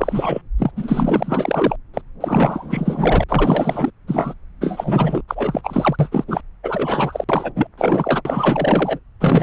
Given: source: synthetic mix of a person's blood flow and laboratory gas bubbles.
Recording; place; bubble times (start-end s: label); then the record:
Doppler ultrasound of blood flow; subclavian vein
0.00-0.42 s: bubbles
0.58-0.71 s: bubbles
0.76-1.76 s: bubbles
1.94-2.02 s: bubbles
2.21-3.24 s: bubbles
3.29-3.91 s: bubbles
4.07-4.34 s: bubbles
4.61-5.22 s: bubbles
5.28-6.24 s: bubbles
6.28-6.41 s: bubbles
6.63-7.24 s: bubbles
7.29-7.52 s: bubbles
7.55-7.67 s: bubbles
7.78-8.21 s: bubbles
8.25-8.99 s: bubbles
9.20-9.43 s: bubbles
From the record:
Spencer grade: 4 (maximum detectable bubble signal sounding continuously throughout systole and diastole of every cardiac period, and overriding the amplitude of the normal cardiac signals); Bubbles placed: anywhere in the cardiac cycle